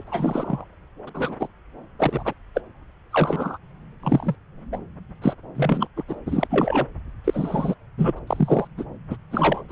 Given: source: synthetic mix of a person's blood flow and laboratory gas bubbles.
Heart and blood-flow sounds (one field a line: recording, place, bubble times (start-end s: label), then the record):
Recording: Doppler ultrasound of blood flow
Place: subclavian vein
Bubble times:
0.00-0.03 s: bubbles
0.07-0.65 s: bubbles
1.07-1.09 s: bubbles
1.14-1.36 s: bubbles
1.39-1.48 s: bubbles
1.98-2.33 s: bubbles
2.54-2.61 s: bubbles
3.11-3.58 s: bubbles
4.03-4.36 s: bubbles
4.72-4.79 s: bubbles
5.21-5.34 s: bubbles
5.55-5.87 s: bubbles
5.96-6.04 s: bubbles
6.08-6.15 s: bubbles
6.26-6.87 s: bubbles
7.24-7.75 s: bubbles
7.97-8.13 s: bubbles
8.16-8.20 s: bubbles
8.27-8.68 s: bubbles
8.77-8.84 s: bubbles
9.10-9.17 s: bubbles
9.30-9.63 s: bubbles
9.68-9.72 s: bubbles
From the record:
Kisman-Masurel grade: 243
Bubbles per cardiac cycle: several, 3 to 8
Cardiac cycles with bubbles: 100%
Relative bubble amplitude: loud (0.450 to 0.775)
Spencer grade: 3 (all of the cardiac periods contain showers or single bubble signals, but not dominating or overriding the cardiac motion signals)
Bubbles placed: anywhere in the cardiac cycle